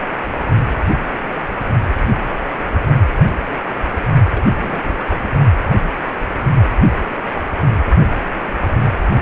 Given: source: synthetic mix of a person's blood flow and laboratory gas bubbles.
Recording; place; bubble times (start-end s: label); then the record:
Doppler ultrasound of blood flow; precordium
4.33-4.43 s: bubbles
4.56-4.82 s: bubbles
4.88-4.92 s: bubbles
4.97-5.04 s: bubbles
5.08-5.21 s: bubbles
From the record:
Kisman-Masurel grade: 221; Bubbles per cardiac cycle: several, 3 to 8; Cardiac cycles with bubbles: 10 to 50%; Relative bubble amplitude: barely perceptible (0.100 to 0.250); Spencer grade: 2 (many but less than half of the cardiac periods contain bubble signals, singularly or in groups); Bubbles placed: only in the low amplitude regions of the cardiac cycle